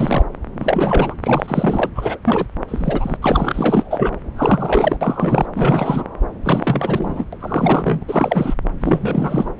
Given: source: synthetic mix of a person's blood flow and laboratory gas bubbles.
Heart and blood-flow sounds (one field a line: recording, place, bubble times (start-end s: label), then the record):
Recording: Doppler ultrasound of blood flow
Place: subclavian vein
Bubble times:
0.00-0.26 s: bubbles
0.59-1.15 s: bubbles
1.22-1.90 s: bubbles
1.95-2.19 s: bubbles
2.25-2.46 s: bubbles
2.69-3.18 s: bubbles
3.22-4.12 s: bubbles
4.36-4.97 s: bubbles
5.01-5.46 s: bubbles
5.56-6.04 s: bubbles
6.42-7.25 s: bubbles
7.33-7.38 s: bubbles
7.41-8.03 s: bubbles
8.07-8.54 s: bubbles
8.80-9.50 s: bubbles
9.58-9.60 s: bubbles
From the record:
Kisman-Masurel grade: 343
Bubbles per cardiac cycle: rolling drumbeat, 9 or more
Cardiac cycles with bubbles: 100%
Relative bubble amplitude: loud (0.450 to 0.775)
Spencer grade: 3 (all of the cardiac periods contain showers or single bubble signals, but not dominating or overriding the cardiac motion signals)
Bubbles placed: anywhere in the cardiac cycle